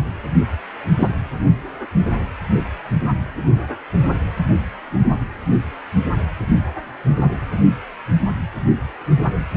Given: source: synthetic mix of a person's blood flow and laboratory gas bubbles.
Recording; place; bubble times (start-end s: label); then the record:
Doppler ultrasound of blood flow; precordium
0.99-1.08 s: bubbles
From the record:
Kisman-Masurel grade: 113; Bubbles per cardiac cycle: 1 to 2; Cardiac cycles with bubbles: 1 to 10%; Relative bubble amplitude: loud (0.450 to 0.775); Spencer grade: 1 (occasional bubble signal discernible with the cardiac motion signal, with majority of cardiac periods free of bubbles); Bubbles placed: anywhere in the cardiac cycle